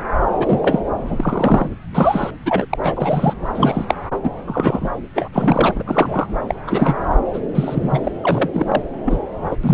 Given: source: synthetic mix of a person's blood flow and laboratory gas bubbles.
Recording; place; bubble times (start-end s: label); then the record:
Doppler ultrasound of blood flow; subclavian vein
0.39-0.81 s: bubbles
1.09-1.70 s: bubbles
1.94-2.31 s: bubbles
2.46-2.65 s: bubbles
2.69-2.76 s: bubbles
2.83-3.33 s: bubbles
3.55-3.85 s: bubbles
3.88-3.94 s: bubbles
4.23-4.30 s: bubbles
4.46-4.90 s: bubbles
5.15-5.29 s: bubbles
5.32-5.71 s: bubbles
5.75-6.26 s: bubbles
6.48-6.54 s: bubbles
6.67-6.97 s: bubbles
7.33-7.39 s: bubbles
7.54-8.09 s: bubbles
8.23-8.50 s: bubbles
8.54-8.82 s: bubbles
9.05-9.17 s: bubbles
9.50-9.55 s: bubbles
9.63-9.74 s: bubbles
From the record:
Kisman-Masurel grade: 242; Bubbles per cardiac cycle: several, 3 to 8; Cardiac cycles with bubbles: 100%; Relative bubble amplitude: moderate (0.250 to 0.450); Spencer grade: 3 (all of the cardiac periods contain showers or single bubble signals, but not dominating or overriding the cardiac motion signals); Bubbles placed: anywhere in the cardiac cycle